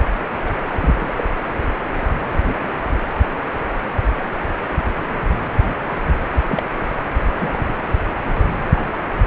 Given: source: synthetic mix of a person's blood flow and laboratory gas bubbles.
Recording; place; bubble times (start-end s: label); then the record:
Doppler ultrasound of blood flow; precordium
0.00-0.08 s: bubbles
0.46-0.52 s: bubbles
0.81-1.14 s: bubbles
1.17-1.24 s: bubbles
2.45-2.70 s: bubbles
6.50-6.62 s: bubbles
7.35-7.62 s: bubbles
8.70-8.85 s: bubbles
From the record:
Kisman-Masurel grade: 122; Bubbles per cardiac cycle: 1 to 2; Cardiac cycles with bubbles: 10 to 50%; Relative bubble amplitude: moderate (0.250 to 0.450); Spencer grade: 2 (many but less than half of the cardiac periods contain bubble signals, singularly or in groups); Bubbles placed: anywhere in the cardiac cycle